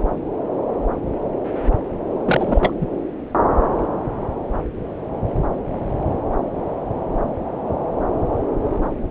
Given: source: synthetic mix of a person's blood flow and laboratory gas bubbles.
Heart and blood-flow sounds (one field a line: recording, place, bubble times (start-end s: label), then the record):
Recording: Doppler ultrasound of blood flow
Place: subclavian vein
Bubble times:
2.24-2.73 s: bubbles
2.80-2.86 s: bubbles
From the record:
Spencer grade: 1 (occasional bubble signal discernible with the cardiac motion signal, with majority of cardiac periods free of bubbles)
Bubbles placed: anywhere in the cardiac cycle